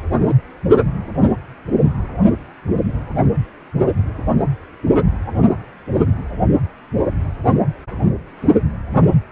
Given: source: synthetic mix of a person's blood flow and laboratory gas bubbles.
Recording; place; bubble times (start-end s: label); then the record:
Doppler ultrasound of blood flow; precordium
0.28-0.34 s: bubbles
From the record:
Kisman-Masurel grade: 113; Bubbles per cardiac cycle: 1 to 2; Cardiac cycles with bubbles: 1 to 10%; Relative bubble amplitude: loud (0.450 to 0.775); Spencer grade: 1 (occasional bubble signal discernible with the cardiac motion signal, with majority of cardiac periods free of bubbles); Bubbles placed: anywhere in the cardiac cycle